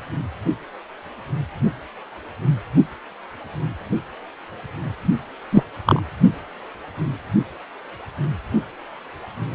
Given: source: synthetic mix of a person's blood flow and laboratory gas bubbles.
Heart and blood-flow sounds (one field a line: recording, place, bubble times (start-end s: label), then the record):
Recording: Doppler ultrasound of blood flow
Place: precordium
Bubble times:
5.52-5.63 s: bubbles
5.86-6.01 s: bubbles
From the record:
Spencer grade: 1 (occasional bubble signal discernible with the cardiac motion signal, with majority of cardiac periods free of bubbles)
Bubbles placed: only in the low amplitude regions of the cardiac cycle